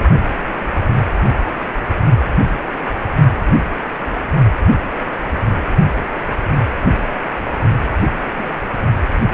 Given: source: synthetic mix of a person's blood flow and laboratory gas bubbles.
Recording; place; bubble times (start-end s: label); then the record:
Doppler ultrasound of blood flow; precordium
7.97-8.06 s: bubbles
8.38-8.50 s: bubbles
From the record:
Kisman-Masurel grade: 111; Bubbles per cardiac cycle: 1 to 2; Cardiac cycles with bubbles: 1 to 10%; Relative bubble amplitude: barely perceptible (0.100 to 0.250); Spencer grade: 1 (occasional bubble signal discernible with the cardiac motion signal, with majority of cardiac periods free of bubbles); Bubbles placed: only in the low amplitude regions of the cardiac cycle